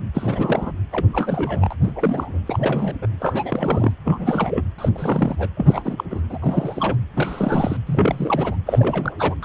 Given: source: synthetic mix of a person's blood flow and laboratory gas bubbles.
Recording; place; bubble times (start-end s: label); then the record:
Doppler ultrasound of blood flow; precordium
0.14-0.71 s: bubbles
0.92-1.05 s: bubbles
1.13-1.75 s: bubbles
1.81-1.92 s: bubbles
1.96-2.39 s: bubbles
2.46-2.95 s: bubbles
3.02-3.07 s: bubbles
3.19-3.92 s: bubbles
4.05-4.62 s: bubbles
4.78-4.89 s: bubbles
4.95-5.49 s: bubbles
5.57-6.04 s: bubbles
6.10-6.21 s: bubbles
6.30-6.38 s: bubbles
6.42-6.97 s: bubbles
7.14-7.77 s: bubbles
7.86-8.57 s: bubbles
8.67-9.16 s: bubbles
9.19-9.36 s: bubbles
9.43-9.45 s: bubbles
From the record:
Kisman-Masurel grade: 332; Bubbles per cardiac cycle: rolling drumbeat, 9 or more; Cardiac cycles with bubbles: 50 to 99%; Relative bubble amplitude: moderate (0.250 to 0.450); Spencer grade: 3 (all of the cardiac periods contain showers or single bubble signals, but not dominating or overriding the cardiac motion signals); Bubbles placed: anywhere in the cardiac cycle